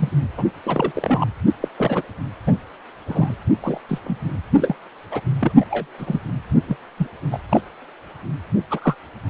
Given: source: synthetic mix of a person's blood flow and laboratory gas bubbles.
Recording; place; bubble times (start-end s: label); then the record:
Doppler ultrasound of blood flow; precordium
0.00-0.09 s: bubbles
0.37-0.44 s: bubbles
0.63-1.27 s: bubbles
1.61-1.68 s: bubbles
1.78-2.03 s: bubbles
2.47-2.56 s: bubbles
3.07-3.35 s: bubbles
3.62-3.79 s: bubbles
3.88-3.99 s: bubbles
4.04-4.17 s: bubbles
4.57-4.75 s: bubbles
5.11-5.21 s: bubbles
5.42-5.52 s: bubbles
5.60-5.65 s: bubbles
5.70-5.87 s: bubbles
5.98-6.20 s: bubbles
6.66-6.77 s: bubbles
6.98-7.07 s: bubbles
7.31-7.39 s: bubbles
7.49-7.61 s: bubbles
8.70-8.95 s: bubbles
From the record:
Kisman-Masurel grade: 232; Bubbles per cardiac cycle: several, 3 to 8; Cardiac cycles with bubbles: 50 to 99%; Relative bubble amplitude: moderate (0.250 to 0.450); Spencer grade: 3 (all of the cardiac periods contain showers or single bubble signals, but not dominating or overriding the cardiac motion signals); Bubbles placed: anywhere in the cardiac cycle